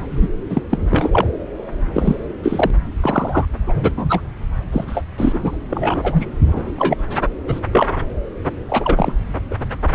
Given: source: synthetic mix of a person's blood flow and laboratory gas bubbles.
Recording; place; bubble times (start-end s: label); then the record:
Doppler ultrasound of blood flow; subclavian vein
0.11-0.28 s: bubbles
0.49-0.62 s: bubbles
0.70-0.84 s: bubbles
0.90-1.09 s: bubbles
1.12-1.27 s: bubbles
1.94-2.17 s: bubbles
2.43-2.71 s: bubbles
3.00-3.45 s: bubbles
3.67-3.93 s: bubbles
3.98-4.21 s: bubbles
4.72-5.02 s: bubbles
5.18-5.58 s: bubbles
5.70-6.26 s: bubbles
6.46-6.71 s: bubbles
6.78-6.97 s: bubbles
7.47-7.60 s: bubbles
7.72-7.87 s: bubbles
8.68-9.12 s: bubbles
9.51-9.56 s: bubbles
9.92-9.95 s: bubbles
From the record:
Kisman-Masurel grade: 243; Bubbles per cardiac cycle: several, 3 to 8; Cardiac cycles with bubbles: 100%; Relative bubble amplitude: loud (0.450 to 0.775); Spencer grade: 3 (all of the cardiac periods contain showers or single bubble signals, but not dominating or overriding the cardiac motion signals); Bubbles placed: anywhere in the cardiac cycle